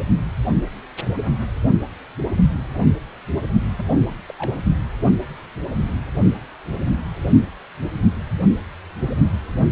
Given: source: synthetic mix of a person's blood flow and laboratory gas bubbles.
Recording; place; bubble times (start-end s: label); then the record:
Doppler ultrasound of blood flow; precordium
3.75-3.86 s: bubbles
3.90-4.14 s: bubbles
4.28-4.34 s: bubbles
4.38-4.54 s: bubbles
From the record:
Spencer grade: 1 (occasional bubble signal discernible with the cardiac motion signal, with majority of cardiac periods free of bubbles); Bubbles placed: only in the low amplitude regions of the cardiac cycle